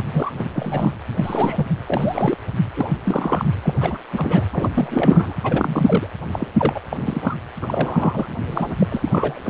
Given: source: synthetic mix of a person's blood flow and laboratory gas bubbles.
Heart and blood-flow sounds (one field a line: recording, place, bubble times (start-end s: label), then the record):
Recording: Doppler ultrasound of blood flow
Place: precordium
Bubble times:
0.00-0.05 s: bubbles
0.13-0.32 s: bubbles
0.38-0.44 s: bubbles
0.54-0.92 s: bubbles
1.17-1.67 s: bubbles
1.86-2.38 s: bubbles
2.74-2.89 s: bubbles
3.03-3.45 s: bubbles
3.62-3.73 s: bubbles
3.80-3.98 s: bubbles
4.12-4.47 s: bubbles
4.53-4.70 s: bubbles
4.74-5.33 s: bubbles
5.43-6.07 s: bubbles
6.32-6.47 s: bubbles
6.57-6.81 s: bubbles
6.91-7.37 s: bubbles
7.62-8.29 s: bubbles
8.51-8.74 s: bubbles
8.79-8.87 s: bubbles
8.89-9.39 s: bubbles
9.44-9.49 s: bubbles
From the record:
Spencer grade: 3 (all of the cardiac periods contain showers or single bubble signals, but not dominating or overriding the cardiac motion signals)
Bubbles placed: anywhere in the cardiac cycle